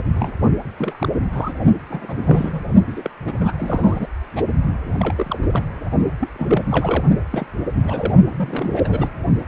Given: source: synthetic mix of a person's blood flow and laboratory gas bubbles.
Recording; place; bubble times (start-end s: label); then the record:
Doppler ultrasound of blood flow; precordium
0.15-0.32 s: bubbles
0.78-1.08 s: bubbles
1.32-1.53 s: bubbles
1.89-2.62 s: bubbles
2.87-3.10 s: bubbles
3.25-3.53 s: bubbles
3.58-4.08 s: bubbles
4.35-4.42 s: bubbles
4.98-5.87 s: bubbles
6.19-6.29 s: bubbles
6.35-6.64 s: bubbles
6.71-7.04 s: bubbles
7.30-7.46 s: bubbles
7.82-8.13 s: bubbles
8.27-9.10 s: bubbles
From the record:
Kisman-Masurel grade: 242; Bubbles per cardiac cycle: several, 3 to 8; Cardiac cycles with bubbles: 100%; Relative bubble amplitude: moderate (0.250 to 0.450); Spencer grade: 3 (all of the cardiac periods contain showers or single bubble signals, but not dominating or overriding the cardiac motion signals); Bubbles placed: only in the low amplitude regions of the cardiac cycle